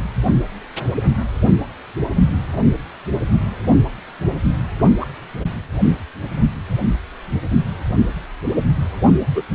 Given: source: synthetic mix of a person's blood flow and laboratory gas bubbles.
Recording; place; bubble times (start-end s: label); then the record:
Doppler ultrasound of blood flow; precordium
4.79-4.87 s: bubbles
5.00-5.05 s: bubbles
9.34-9.42 s: bubbles
From the record:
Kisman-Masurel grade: 123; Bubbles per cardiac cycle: 1 to 2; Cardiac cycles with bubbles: 10 to 50%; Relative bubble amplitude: loud (0.450 to 0.775); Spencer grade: 2 (many but less than half of the cardiac periods contain bubble signals, singularly or in groups); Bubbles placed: anywhere in the cardiac cycle